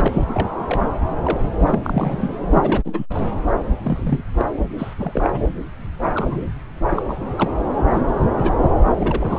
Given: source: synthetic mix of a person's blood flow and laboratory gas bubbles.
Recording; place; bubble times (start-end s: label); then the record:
Doppler ultrasound of blood flow; subclavian vein
0.00-0.08 s: bubbles
0.12-0.24 s: bubbles
0.33-0.51 s: bubbles
0.68-0.92 s: bubbles
1.23-1.43 s: bubbles
1.66-1.79 s: bubbles
1.82-2.29 s: bubbles
2.50-2.81 s: bubbles
2.84-3.06 s: bubbles
3.15-3.20 s: bubbles
3.84-4.23 s: bubbles
4.38-4.45 s: bubbles
4.78-4.94 s: bubbles
4.98-5.40 s: bubbles
6.15-6.44 s: bubbles
6.89-7.03 s: bubbles
7.08-7.17 s: bubbles
7.37-7.50 s: bubbles
7.93-8.02 s: bubbles
8.37-8.55 s: bubbles
8.99-9.39 s: bubbles
From the record:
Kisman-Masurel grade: 242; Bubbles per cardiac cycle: several, 3 to 8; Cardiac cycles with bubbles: 100%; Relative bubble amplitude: moderate (0.250 to 0.450); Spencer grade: 3 (all of the cardiac periods contain showers or single bubble signals, but not dominating or overriding the cardiac motion signals); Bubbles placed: anywhere in the cardiac cycle